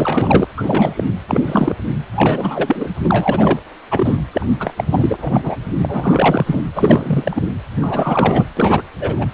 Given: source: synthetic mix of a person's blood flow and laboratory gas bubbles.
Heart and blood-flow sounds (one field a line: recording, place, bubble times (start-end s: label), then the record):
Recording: Doppler ultrasound of blood flow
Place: precordium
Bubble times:
0.00-0.45 s: bubbles
0.56-1.03 s: bubbles
1.28-1.43 s: bubbles
1.46-1.74 s: bubbles
2.15-2.90 s: bubbles
3.04-3.60 s: bubbles
3.91-4.23 s: bubbles
4.33-4.46 s: bubbles
4.60-4.74 s: bubbles
4.77-4.85 s: bubbles
4.90-5.57 s: bubbles
5.78-6.44 s: bubbles
6.46-6.63 s: bubbles
6.75-7.42 s: bubbles
7.80-8.48 s: bubbles
8.57-8.83 s: bubbles
9.00-9.26 s: bubbles
From the record:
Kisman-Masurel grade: 343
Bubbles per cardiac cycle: rolling drumbeat, 9 or more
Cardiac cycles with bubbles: 100%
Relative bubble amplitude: loud (0.450 to 0.775)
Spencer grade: 3 (all of the cardiac periods contain showers or single bubble signals, but not dominating or overriding the cardiac motion signals)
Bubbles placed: anywhere in the cardiac cycle